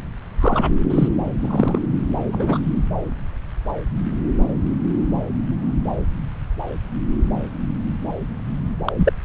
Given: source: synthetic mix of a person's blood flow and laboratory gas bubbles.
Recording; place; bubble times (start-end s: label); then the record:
Doppler ultrasound of blood flow; subclavian vein
0.41-0.70 s: bubbles
0.90-1.08 s: bubbles
1.40-1.79 s: bubbles
2.32-2.59 s: bubbles
8.85-8.92 s: bubbles
8.97-9.12 s: bubbles
From the record:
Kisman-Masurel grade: 122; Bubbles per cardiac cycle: 1 to 2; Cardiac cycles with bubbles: 10 to 50%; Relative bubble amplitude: moderate (0.250 to 0.450); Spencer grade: 2 (many but less than half of the cardiac periods contain bubble signals, singularly or in groups); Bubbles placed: anywhere in the cardiac cycle